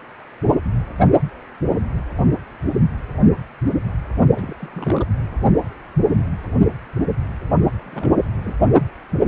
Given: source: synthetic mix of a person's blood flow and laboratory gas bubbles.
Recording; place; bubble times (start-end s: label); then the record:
Doppler ultrasound of blood flow; precordium
4.35-4.54 s: bubbles
4.58-5.06 s: bubbles
7.84-8.31 s: bubbles
8.43-8.55 s: bubbles
From the record:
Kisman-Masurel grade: 221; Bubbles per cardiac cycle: several, 3 to 8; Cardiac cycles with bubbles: 10 to 50%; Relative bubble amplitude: barely perceptible (0.100 to 0.250); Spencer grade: 2 (many but less than half of the cardiac periods contain bubble signals, singularly or in groups); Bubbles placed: only in the low amplitude regions of the cardiac cycle